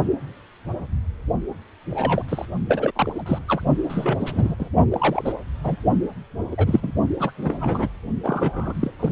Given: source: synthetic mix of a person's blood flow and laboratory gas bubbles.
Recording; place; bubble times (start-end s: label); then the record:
Doppler ultrasound of blood flow; precordium
1.91-2.23 s: bubbles
2.28-2.46 s: bubbles
2.69-2.91 s: bubbles
2.96-3.39 s: bubbles
3.48-3.61 s: bubbles
3.89-4.55 s: bubbles
4.59-4.69 s: bubbles
4.91-5.32 s: bubbles
5.63-5.76 s: bubbles
6.51-6.80 s: bubbles
6.82-6.91 s: bubbles
7.19-7.31 s: bubbles
7.37-7.88 s: bubbles
8.22-8.91 s: bubbles
9.00-9.12 s: bubbles
From the record:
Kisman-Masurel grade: 232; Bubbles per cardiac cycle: several, 3 to 8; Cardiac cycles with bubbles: 50 to 99%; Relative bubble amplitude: moderate (0.250 to 0.450); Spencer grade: 3 (all of the cardiac periods contain showers or single bubble signals, but not dominating or overriding the cardiac motion signals); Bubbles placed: only in the low amplitude regions of the cardiac cycle